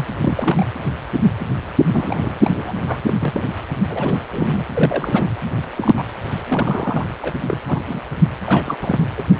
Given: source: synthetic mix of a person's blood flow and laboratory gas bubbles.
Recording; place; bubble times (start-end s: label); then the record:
Doppler ultrasound of blood flow; precordium
0.00-0.04 s: bubbles
0.20-0.66 s: bubbles
1.39-1.47 s: bubbles
1.88-2.31 s: bubbles
2.43-3.02 s: bubbles
3.07-3.15 s: bubbles
3.20-3.43 s: bubbles
3.89-4.19 s: bubbles
4.32-4.65 s: bubbles
4.75-5.29 s: bubbles
5.77-6.03 s: bubbles
6.46-7.06 s: bubbles
7.21-7.34 s: bubbles
7.48-7.58 s: bubbles
7.67-7.81 s: bubbles
7.87-8.00 s: bubbles
8.46-8.76 s: bubbles
8.80-9.06 s: bubbles
9.17-9.22 s: bubbles
9.31-9.40 s: bubbles
From the record:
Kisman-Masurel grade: 242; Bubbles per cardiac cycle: several, 3 to 8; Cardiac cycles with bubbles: 100%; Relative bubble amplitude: moderate (0.250 to 0.450); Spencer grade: 3 (all of the cardiac periods contain showers or single bubble signals, but not dominating or overriding the cardiac motion signals); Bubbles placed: anywhere in the cardiac cycle